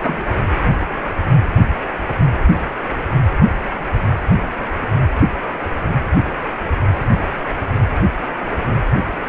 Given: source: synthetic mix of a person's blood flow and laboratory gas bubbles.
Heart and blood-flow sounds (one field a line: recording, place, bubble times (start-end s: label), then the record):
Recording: Doppler ultrasound of blood flow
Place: precordium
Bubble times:
0.01-0.23 s: bubbles
From the record:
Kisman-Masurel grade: 113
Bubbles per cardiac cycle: 1 to 2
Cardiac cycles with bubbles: 1 to 10%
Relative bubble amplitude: loud (0.450 to 0.775)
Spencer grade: 1 (occasional bubble signal discernible with the cardiac motion signal, with majority of cardiac periods free of bubbles)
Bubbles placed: anywhere in the cardiac cycle